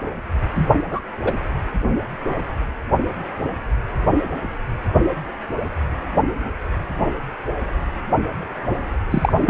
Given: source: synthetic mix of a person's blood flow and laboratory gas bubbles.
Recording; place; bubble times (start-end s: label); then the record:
Doppler ultrasound of blood flow; precordium
0.56-0.67 s: bubbles
0.90-1.00 s: bubbles
1.25-1.32 s: bubbles
9.11-9.33 s: bubbles
9.41-9.50 s: bubbles
From the record:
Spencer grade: 2 (many but less than half of the cardiac periods contain bubble signals, singularly or in groups); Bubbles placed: anywhere in the cardiac cycle